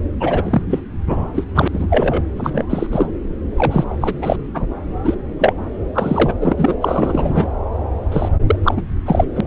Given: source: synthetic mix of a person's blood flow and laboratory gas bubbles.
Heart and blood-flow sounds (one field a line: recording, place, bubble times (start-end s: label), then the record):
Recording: Doppler ultrasound of blood flow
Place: subclavian vein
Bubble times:
0.20-0.61 s: bubbles
0.69-0.80 s: bubbles
1.06-1.29 s: bubbles
1.35-1.44 s: bubbles
1.54-1.68 s: bubbles
1.73-1.88 s: bubbles
1.90-2.24 s: bubbles
2.35-2.64 s: bubbles
2.70-2.87 s: bubbles
2.91-3.07 s: bubbles
3.57-3.95 s: bubbles
4.00-4.14 s: bubbles
4.21-4.36 s: bubbles
4.54-4.67 s: bubbles
5.04-5.14 s: bubbles
5.39-5.53 s: bubbles
5.94-6.33 s: bubbles
6.40-6.53 s: bubbles
6.56-6.75 s: bubbles
6.80-7.47 s: bubbles
8.12-8.29 s: bubbles
8.46-8.55 s: bubbles
8.63-8.82 s: bubbles
9.06-9.25 s: bubbles
9.35-9.41 s: bubbles
From the record:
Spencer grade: 3 (all of the cardiac periods contain showers or single bubble signals, but not dominating or overriding the cardiac motion signals)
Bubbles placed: anywhere in the cardiac cycle